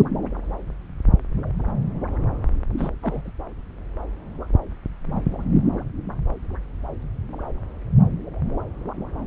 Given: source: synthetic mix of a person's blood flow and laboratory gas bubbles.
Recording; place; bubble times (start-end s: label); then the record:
Doppler ultrasound of blood flow; subclavian vein
2.78-2.90 s: bubbles
3.02-3.31 s: bubbles
From the record:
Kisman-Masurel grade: 112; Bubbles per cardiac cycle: 1 to 2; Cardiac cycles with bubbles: 1 to 10%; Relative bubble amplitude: moderate (0.250 to 0.450); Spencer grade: 1 (occasional bubble signal discernible with the cardiac motion signal, with majority of cardiac periods free of bubbles); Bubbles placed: anywhere in the cardiac cycle